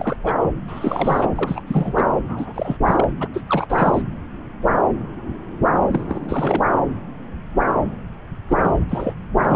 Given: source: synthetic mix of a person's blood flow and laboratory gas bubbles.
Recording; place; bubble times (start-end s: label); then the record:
Doppler ultrasound of blood flow; subclavian vein
0.00-0.17 s: bubbles
0.23-0.35 s: bubbles
0.68-1.29 s: bubbles
1.35-1.61 s: bubbles
1.67-2.10 s: bubbles
2.28-2.77 s: bubbles
2.85-3.08 s: bubbles
3.20-3.28 s: bubbles
3.33-3.41 s: bubbles
3.47-4.02 s: bubbles
5.92-6.63 s: bubbles
8.48-8.79 s: bubbles
8.89-9.13 s: bubbles
9.42-9.56 s: bubbles
From the record:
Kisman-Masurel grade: 332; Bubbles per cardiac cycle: rolling drumbeat, 9 or more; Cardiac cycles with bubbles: 50 to 99%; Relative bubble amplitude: moderate (0.250 to 0.450); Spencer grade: 3 (all of the cardiac periods contain showers or single bubble signals, but not dominating or overriding the cardiac motion signals); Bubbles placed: anywhere in the cardiac cycle